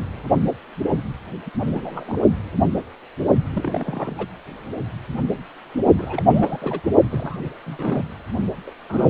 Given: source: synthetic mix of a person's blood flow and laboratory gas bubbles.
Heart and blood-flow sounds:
Doppler ultrasound of blood flow; precordium
1.46-1.50 s: bubbles
1.60-2.19 s: bubbles
3.52-4.27 s: bubbles
5.97-6.80 s: bubbles
7.10-7.40 s: bubbles
7.43-7.50 s: bubbles
7.66-8.04 s: bubbles
8.67-8.71 s: bubbles
8.89-9.10 s: bubbles
From the record:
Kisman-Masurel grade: 221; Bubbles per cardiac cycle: several, 3 to 8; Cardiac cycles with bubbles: 10 to 50%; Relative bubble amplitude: barely perceptible (0.100 to 0.250); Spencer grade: 2 (many but less than half of the cardiac periods contain bubble signals, singularly or in groups); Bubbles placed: only in the low amplitude regions of the cardiac cycle

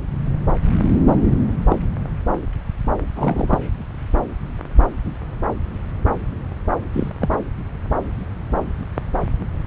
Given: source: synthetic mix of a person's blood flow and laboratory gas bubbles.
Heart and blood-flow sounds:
Doppler ultrasound of blood flow; subclavian vein
1.06-1.15 s: bubbles
1.69-1.77 s: bubbles
3.15-3.58 s: bubbles
6.93-7.10 s: bubbles
7.21-7.29 s: bubbles
From the record:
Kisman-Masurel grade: 122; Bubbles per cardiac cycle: 1 to 2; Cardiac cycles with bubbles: 10 to 50%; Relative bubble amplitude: moderate (0.250 to 0.450); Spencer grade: 2 (many but less than half of the cardiac periods contain bubble signals, singularly or in groups); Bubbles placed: anywhere in the cardiac cycle

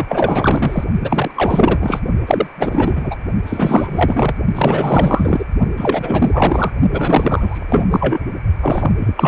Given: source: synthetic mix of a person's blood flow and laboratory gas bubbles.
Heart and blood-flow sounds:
Doppler ultrasound of blood flow; precordium
0.00-0.06 s: bubbles
0.08-0.84 s: bubbles
1.00-1.31 s: bubbles
1.35-2.00 s: bubbles
2.27-2.47 s: bubbles
2.56-3.15 s: bubbles
3.46-4.38 s: bubbles
4.54-5.45 s: bubbles
5.77-6.71 s: bubbles
6.92-7.87 s: bubbles
7.91-8.22 s: bubbles
8.62-8.92 s: bubbles
8.99-9.28 s: bubbles
From the record:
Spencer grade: 4 (maximum detectable bubble signal sounding continuously throughout systole and diastole of every cardiac period, and overriding the amplitude of the normal cardiac signals); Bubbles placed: only in the low amplitude regions of the cardiac cycle

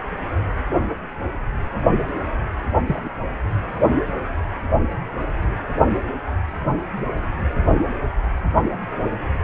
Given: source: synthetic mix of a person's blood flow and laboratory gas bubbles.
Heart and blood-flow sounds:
Doppler ultrasound of blood flow; precordium
2.86-3.10 s: bubbles
From the record:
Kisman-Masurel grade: 112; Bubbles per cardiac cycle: 1 to 2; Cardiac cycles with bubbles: 1 to 10%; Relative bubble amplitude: moderate (0.250 to 0.450); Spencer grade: 1 (occasional bubble signal discernible with the cardiac motion signal, with majority of cardiac periods free of bubbles); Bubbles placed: only in the low amplitude regions of the cardiac cycle

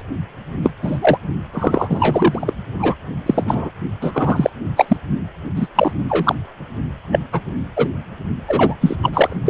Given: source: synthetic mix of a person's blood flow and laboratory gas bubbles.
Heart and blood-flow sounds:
Doppler ultrasound of blood flow; precordium
0.00-0.02 s: bubbles
0.63-0.71 s: bubbles
0.82-1.18 s: bubbles
1.54-2.54 s: bubbles
2.79-2.95 s: bubbles
3.26-3.71 s: bubbles
4.01-4.12 s: bubbles
4.14-4.50 s: bubbles
4.75-4.85 s: bubbles
4.88-4.96 s: bubbles
5.55-5.67 s: bubbles
5.75-5.92 s: bubbles
6.09-6.35 s: bubbles
7.12-7.19 s: bubbles
7.32-7.41 s: bubbles
7.76-7.89 s: bubbles
8.48-8.75 s: bubbles
8.81-8.96 s: bubbles
9.03-9.37 s: bubbles
9.46-9.50 s: bubbles
From the record:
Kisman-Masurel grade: 243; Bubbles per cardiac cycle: several, 3 to 8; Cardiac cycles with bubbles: 100%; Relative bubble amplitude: loud (0.450 to 0.775); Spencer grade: 3 (all of the cardiac periods contain showers or single bubble signals, but not dominating or overriding the cardiac motion signals); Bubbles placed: only in the low amplitude regions of the cardiac cycle

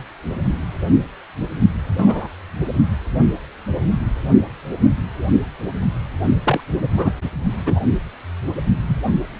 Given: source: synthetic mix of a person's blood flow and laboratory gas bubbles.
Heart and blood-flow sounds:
Doppler ultrasound of blood flow; precordium
1.98-2.28 s: bubbles
6.44-6.61 s: bubbles
6.97-7.11 s: bubbles
7.66-7.79 s: bubbles
8.88-8.96 s: bubbles
From the record:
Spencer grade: 2 (many but less than half of the cardiac periods contain bubble signals, singularly or in groups); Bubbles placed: only in the low amplitude regions of the cardiac cycle

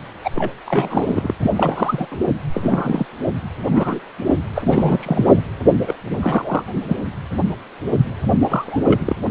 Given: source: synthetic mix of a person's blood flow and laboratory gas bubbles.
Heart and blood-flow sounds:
Doppler ultrasound of blood flow; precordium
0.24-0.30 s: bubbles
0.35-0.51 s: bubbles
0.66-1.31 s: bubbles
1.40-1.51 s: bubbles
1.55-2.06 s: bubbles
2.10-2.18 s: bubbles
2.54-3.06 s: bubbles
3.56-4.00 s: bubbles
4.27-4.34 s: bubbles
4.55-5.41 s: bubbles
5.86-5.95 s: bubbles
6.11-6.18 s: bubbles
6.21-6.63 s: bubbles
6.88-6.97 s: bubbles
8.40-9.16 s: bubbles
From the record:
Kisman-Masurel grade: 232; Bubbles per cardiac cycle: several, 3 to 8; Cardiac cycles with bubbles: 50 to 99%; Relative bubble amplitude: moderate (0.250 to 0.450); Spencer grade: 3 (all of the cardiac periods contain showers or single bubble signals, but not dominating or overriding the cardiac motion signals); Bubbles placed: anywhere in the cardiac cycle

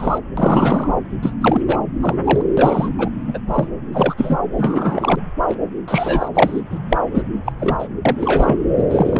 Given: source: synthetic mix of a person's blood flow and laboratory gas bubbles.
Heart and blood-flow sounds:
Doppler ultrasound of blood flow; subclavian vein
0.00-0.19 s: bubbles
0.37-0.88 s: bubbles
1.22-1.33 s: bubbles
1.41-1.61 s: bubbles
1.66-1.78 s: bubbles
2.00-2.17 s: bubbles
2.24-2.42 s: bubbles
2.57-2.88 s: bubbles
2.98-3.09 s: bubbles
3.26-3.38 s: bubbles
3.48-3.67 s: bubbles
3.92-4.38 s: bubbles
4.57-5.21 s: bubbles
5.48-5.54 s: bubbles
5.88-6.29 s: bubbles
6.34-6.62 s: bubbles
6.70-6.79 s: bubbles
6.90-6.97 s: bubbles
7.15-7.23 s: bubbles
7.46-7.53 s: bubbles
7.58-7.88 s: bubbles
8.05-8.15 s: bubbles
8.20-8.57 s: bubbles
8.77-8.83 s: bubbles
8.89-9.20 s: bubbles
From the record:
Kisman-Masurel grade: 243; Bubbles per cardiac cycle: several, 3 to 8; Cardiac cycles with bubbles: 100%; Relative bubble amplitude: loud (0.450 to 0.775); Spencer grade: 3 (all of the cardiac periods contain showers or single bubble signals, but not dominating or overriding the cardiac motion signals); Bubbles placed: anywhere in the cardiac cycle

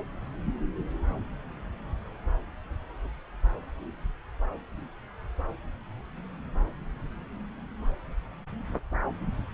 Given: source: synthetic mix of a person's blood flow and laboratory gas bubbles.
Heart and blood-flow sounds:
Doppler ultrasound of blood flow; subclavian vein
no bubbles
From the record:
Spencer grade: 0 (complete lack of bubble signals)

